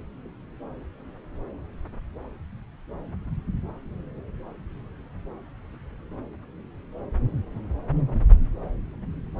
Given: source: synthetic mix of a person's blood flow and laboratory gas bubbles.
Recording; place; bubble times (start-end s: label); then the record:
Doppler ultrasound of blood flow; subclavian vein
no bubbles
From the record:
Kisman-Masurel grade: 000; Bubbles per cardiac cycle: 0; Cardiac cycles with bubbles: 0%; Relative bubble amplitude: no bubbles discernible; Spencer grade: 0 (complete lack of bubble signals)